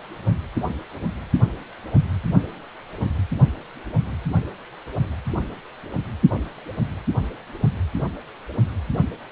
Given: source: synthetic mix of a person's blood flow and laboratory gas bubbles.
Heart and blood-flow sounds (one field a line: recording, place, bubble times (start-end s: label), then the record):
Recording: Doppler ultrasound of blood flow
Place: precordium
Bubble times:
no bubbles
From the record:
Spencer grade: 0 (complete lack of bubble signals)